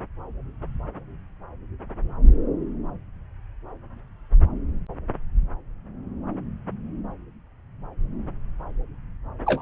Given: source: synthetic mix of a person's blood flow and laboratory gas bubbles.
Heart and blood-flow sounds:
Doppler ultrasound of blood flow; subclavian vein
9.46-9.62 s: bubbles
From the record:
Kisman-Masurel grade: 213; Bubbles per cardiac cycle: several, 3 to 8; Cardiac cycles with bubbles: 1 to 10%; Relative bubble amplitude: loud (0.450 to 0.775); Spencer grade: 1 (occasional bubble signal discernible with the cardiac motion signal, with majority of cardiac periods free of bubbles); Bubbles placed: anywhere in the cardiac cycle

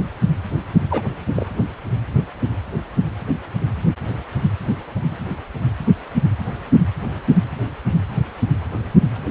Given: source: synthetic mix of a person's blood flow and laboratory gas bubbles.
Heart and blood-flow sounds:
Doppler ultrasound of blood flow; precordium
0.90-1.03 s: bubbles
1.35-1.47 s: bubbles
From the record:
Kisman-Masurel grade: 112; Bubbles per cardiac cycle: 1 to 2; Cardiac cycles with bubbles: 1 to 10%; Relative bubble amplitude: moderate (0.250 to 0.450); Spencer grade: 1 (occasional bubble signal discernible with the cardiac motion signal, with majority of cardiac periods free of bubbles); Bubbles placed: anywhere in the cardiac cycle

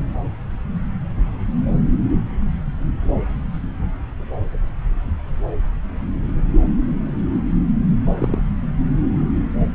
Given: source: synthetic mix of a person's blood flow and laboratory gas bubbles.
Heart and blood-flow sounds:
Doppler ultrasound of blood flow; subclavian vein
8.19-8.43 s: bubbles
From the record:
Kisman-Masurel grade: 112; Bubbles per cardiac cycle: 1 to 2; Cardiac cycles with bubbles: 1 to 10%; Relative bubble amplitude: moderate (0.250 to 0.450); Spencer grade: 1 (occasional bubble signal discernible with the cardiac motion signal, with majority of cardiac periods free of bubbles); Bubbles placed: anywhere in the cardiac cycle

